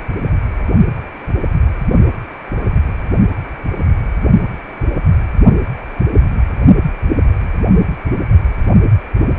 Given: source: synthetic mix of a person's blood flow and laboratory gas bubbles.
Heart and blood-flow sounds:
Doppler ultrasound of blood flow; precordium
no bubbles
From the record:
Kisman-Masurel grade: 000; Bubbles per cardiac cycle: 0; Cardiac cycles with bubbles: 0%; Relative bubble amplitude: no bubbles discernible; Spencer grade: 0 (complete lack of bubble signals)

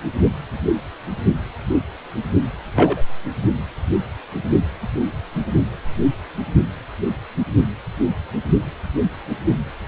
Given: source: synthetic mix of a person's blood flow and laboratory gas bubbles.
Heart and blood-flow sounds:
Doppler ultrasound of blood flow; precordium
2.76-3.02 s: bubbles
From the record:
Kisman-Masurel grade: 122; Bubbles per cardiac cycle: 1 to 2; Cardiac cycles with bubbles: 10 to 50%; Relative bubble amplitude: moderate (0.250 to 0.450); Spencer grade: 2 (many but less than half of the cardiac periods contain bubble signals, singularly or in groups); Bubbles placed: only in the low amplitude regions of the cardiac cycle

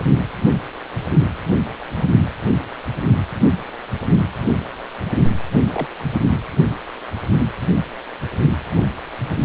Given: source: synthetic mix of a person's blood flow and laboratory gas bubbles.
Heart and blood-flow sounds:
Doppler ultrasound of blood flow; precordium
5.72-5.87 s: bubbles
6.12-6.22 s: bubbles
From the record:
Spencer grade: 1 (occasional bubble signal discernible with the cardiac motion signal, with majority of cardiac periods free of bubbles); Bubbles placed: anywhere in the cardiac cycle

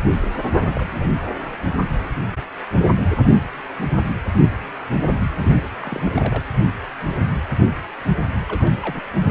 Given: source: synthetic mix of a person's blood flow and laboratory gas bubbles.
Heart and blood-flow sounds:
Doppler ultrasound of blood flow; precordium
0.23-0.41 s: bubbles
0.58-1.09 s: bubbles
5.38-5.63 s: bubbles
5.81-6.43 s: bubbles
8.48-8.72 s: bubbles
8.82-9.01 s: bubbles
From the record:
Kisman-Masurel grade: 221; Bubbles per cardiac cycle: several, 3 to 8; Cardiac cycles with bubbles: 10 to 50%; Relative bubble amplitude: barely perceptible (0.100 to 0.250); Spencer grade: 2 (many but less than half of the cardiac periods contain bubble signals, singularly or in groups); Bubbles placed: anywhere in the cardiac cycle

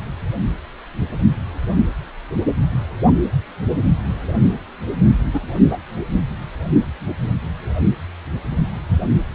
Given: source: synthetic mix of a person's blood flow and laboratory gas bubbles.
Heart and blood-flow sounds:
Doppler ultrasound of blood flow; precordium
5.33-5.40 s: bubbles
5.70-5.79 s: bubbles
From the record:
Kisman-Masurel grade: 113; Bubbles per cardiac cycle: 1 to 2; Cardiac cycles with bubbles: 1 to 10%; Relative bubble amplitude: loud (0.450 to 0.775); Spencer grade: 1 (occasional bubble signal discernible with the cardiac motion signal, with majority of cardiac periods free of bubbles); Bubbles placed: anywhere in the cardiac cycle

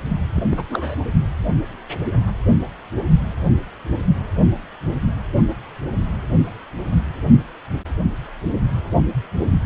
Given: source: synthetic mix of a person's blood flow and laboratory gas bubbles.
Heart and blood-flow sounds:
Doppler ultrasound of blood flow; precordium
0.35-0.43 s: bubbles
0.49-0.64 s: bubbles
0.70-0.95 s: bubbles
From the record:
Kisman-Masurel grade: 222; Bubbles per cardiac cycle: several, 3 to 8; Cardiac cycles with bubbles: 10 to 50%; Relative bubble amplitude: moderate (0.250 to 0.450); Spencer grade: 2 (many but less than half of the cardiac periods contain bubble signals, singularly or in groups); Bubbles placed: only in the low amplitude regions of the cardiac cycle

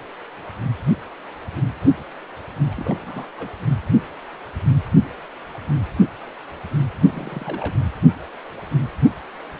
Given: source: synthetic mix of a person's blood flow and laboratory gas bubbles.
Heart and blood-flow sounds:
Doppler ultrasound of blood flow; precordium
2.70-3.25 s: bubbles
3.37-3.50 s: bubbles
7.07-7.75 s: bubbles
From the record:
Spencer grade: 2 (many but less than half of the cardiac periods contain bubble signals, singularly or in groups); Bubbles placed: anywhere in the cardiac cycle

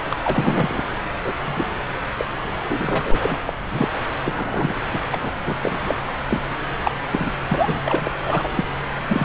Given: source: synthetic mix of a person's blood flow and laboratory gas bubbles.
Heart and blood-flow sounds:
Doppler ultrasound of blood flow; subclavian vein
0.10-0.17 s: bubbles
0.24-0.83 s: bubbles
1.25-1.33 s: bubbles
1.46-1.67 s: bubbles
2.16-2.25 s: bubbles
2.68-3.40 s: bubbles
3.46-3.53 s: bubbles
3.71-3.88 s: bubbles
4.25-4.72 s: bubbles
4.76-4.80 s: bubbles
4.93-4.99 s: bubbles
5.12-5.32 s: bubbles
5.46-5.54 s: bubbles
5.62-5.95 s: bubbles
6.28-6.42 s: bubbles
6.83-6.91 s: bubbles
7.12-7.31 s: bubbles
7.48-7.82 s: bubbles
7.85-8.15 s: bubbles
8.25-8.48 s: bubbles
8.55-8.65 s: bubbles
9.08-9.25 s: bubbles
From the record:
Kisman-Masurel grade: 242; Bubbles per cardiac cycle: several, 3 to 8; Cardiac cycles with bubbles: 100%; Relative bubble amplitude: moderate (0.250 to 0.450); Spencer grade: 3 (all of the cardiac periods contain showers or single bubble signals, but not dominating or overriding the cardiac motion signals); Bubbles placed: anywhere in the cardiac cycle

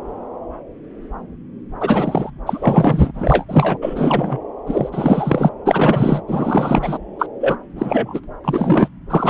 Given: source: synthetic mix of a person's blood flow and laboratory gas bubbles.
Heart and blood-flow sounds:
Doppler ultrasound of blood flow; subclavian vein
1.80-2.30 s: bubbles
2.46-3.44 s: bubbles
3.48-3.77 s: bubbles
3.81-4.38 s: bubbles
4.66-5.50 s: bubbles
5.65-6.21 s: bubbles
6.28-6.98 s: bubbles
7.19-7.27 s: bubbles
7.40-7.56 s: bubbles
7.75-8.20 s: bubbles
8.44-8.88 s: bubbles
9.10-9.30 s: bubbles
From the record:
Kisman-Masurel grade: 333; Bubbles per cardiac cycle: rolling drumbeat, 9 or more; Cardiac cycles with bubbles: 50 to 99%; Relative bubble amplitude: loud (0.450 to 0.775); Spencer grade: 3 (all of the cardiac periods contain showers or single bubble signals, but not dominating or overriding the cardiac motion signals); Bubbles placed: anywhere in the cardiac cycle

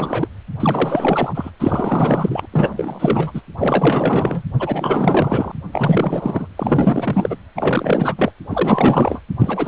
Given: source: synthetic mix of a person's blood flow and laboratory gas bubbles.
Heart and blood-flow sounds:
Doppler ultrasound of blood flow; precordium
0.00-0.28 s: bubbles
0.59-1.51 s: bubbles
1.59-2.48 s: bubbles
2.52-3.42 s: bubbles
3.58-4.42 s: bubbles
4.59-5.52 s: bubbles
5.72-6.47 s: bubbles
6.56-7.36 s: bubbles
7.55-8.32 s: bubbles
8.49-9.21 s: bubbles
9.38-9.68 s: bubbles
From the record:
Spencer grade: 4 (maximum detectable bubble signal sounding continuously throughout systole and diastole of every cardiac period, and overriding the amplitude of the normal cardiac signals); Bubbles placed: anywhere in the cardiac cycle

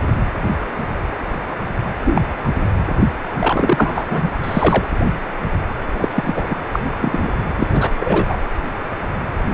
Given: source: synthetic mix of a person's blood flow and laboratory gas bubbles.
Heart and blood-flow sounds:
Doppler ultrasound of blood flow; precordium
2.06-2.22 s: bubbles
2.44-2.50 s: bubbles
3.39-4.04 s: bubbles
4.08-4.29 s: bubbles
4.43-4.88 s: bubbles
5.99-6.08 s: bubbles
6.14-6.55 s: bubbles
6.71-6.79 s: bubbles
7.00-7.29 s: bubbles
7.57-7.67 s: bubbles
7.72-7.90 s: bubbles
7.98-8.37 s: bubbles
From the record:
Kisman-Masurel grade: 233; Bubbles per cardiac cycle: several, 3 to 8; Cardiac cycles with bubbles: 50 to 99%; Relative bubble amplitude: loud (0.450 to 0.775); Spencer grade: 3 (all of the cardiac periods contain showers or single bubble signals, but not dominating or overriding the cardiac motion signals); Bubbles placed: anywhere in the cardiac cycle

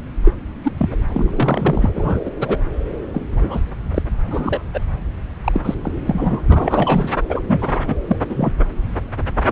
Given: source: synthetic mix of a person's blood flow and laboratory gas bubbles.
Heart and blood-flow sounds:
Doppler ultrasound of blood flow; subclavian vein
0.25-0.34 s: bubbles
0.64-0.73 s: bubbles
0.77-0.98 s: bubbles
1.14-1.90 s: bubbles
1.95-2.21 s: bubbles
2.25-2.31 s: bubbles
2.40-2.58 s: bubbles
3.13-3.25 s: bubbles
3.36-3.60 s: bubbles
3.94-4.02 s: bubbles
4.28-4.62 s: bubbles
4.73-4.80 s: bubbles
5.44-5.62 s: bubbles
5.65-5.75 s: bubbles
5.84-5.92 s: bubbles
6.06-6.42 s: bubbles
6.49-7.10 s: bubbles
7.29-7.41 s: bubbles
7.48-7.79 s: bubbles
7.88-7.96 s: bubbles
8.08-8.17 s: bubbles
8.29-8.53 s: bubbles
From the record:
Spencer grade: 3 (all of the cardiac periods contain showers or single bubble signals, but not dominating or overriding the cardiac motion signals); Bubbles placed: anywhere in the cardiac cycle

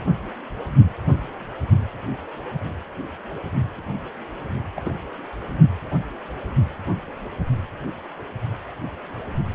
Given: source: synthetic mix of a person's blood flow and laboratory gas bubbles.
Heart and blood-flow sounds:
Doppler ultrasound of blood flow; precordium
4.76-4.81 s: bubbles
4.85-4.90 s: bubbles
From the record:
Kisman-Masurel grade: 112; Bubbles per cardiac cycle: 1 to 2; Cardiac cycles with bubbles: 1 to 10%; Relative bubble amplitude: moderate (0.250 to 0.450); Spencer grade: 1 (occasional bubble signal discernible with the cardiac motion signal, with majority of cardiac periods free of bubbles); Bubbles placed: anywhere in the cardiac cycle

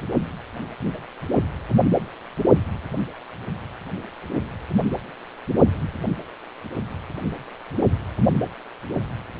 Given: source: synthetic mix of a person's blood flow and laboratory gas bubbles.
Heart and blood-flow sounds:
Doppler ultrasound of blood flow; precordium
no bubbles
From the record:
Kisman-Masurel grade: 000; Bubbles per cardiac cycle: 0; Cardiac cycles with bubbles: 0%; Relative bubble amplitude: no bubbles discernible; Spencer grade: 0 (complete lack of bubble signals)

